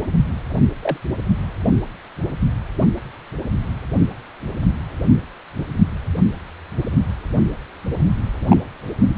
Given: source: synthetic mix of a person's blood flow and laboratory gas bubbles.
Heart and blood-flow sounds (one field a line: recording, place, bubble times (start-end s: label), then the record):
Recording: Doppler ultrasound of blood flow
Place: precordium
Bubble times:
0.82-0.98 s: bubbles
8.47-8.62 s: bubbles
9.09-9.15 s: bubbles
From the record:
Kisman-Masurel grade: 122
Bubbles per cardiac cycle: 1 to 2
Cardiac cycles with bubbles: 10 to 50%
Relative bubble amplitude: moderate (0.250 to 0.450)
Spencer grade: 2 (many but less than half of the cardiac periods contain bubble signals, singularly or in groups)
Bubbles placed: anywhere in the cardiac cycle